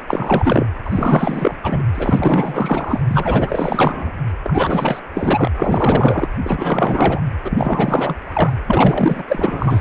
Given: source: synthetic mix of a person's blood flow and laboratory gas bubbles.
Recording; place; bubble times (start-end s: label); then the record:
Doppler ultrasound of blood flow; precordium
0.08-0.67 s: bubbles
0.85-1.55 s: bubbles
1.63-1.83 s: bubbles
1.95-3.00 s: bubbles
3.07-4.13 s: bubbles
4.44-5.00 s: bubbles
5.14-5.48 s: bubbles
5.57-6.29 s: bubbles
6.44-7.21 s: bubbles
7.44-8.18 s: bubbles
8.21-8.56 s: bubbles
8.67-9.23 s: bubbles
9.28-9.81 s: bubbles
From the record:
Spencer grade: 4 (maximum detectable bubble signal sounding continuously throughout systole and diastole of every cardiac period, and overriding the amplitude of the normal cardiac signals); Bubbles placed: anywhere in the cardiac cycle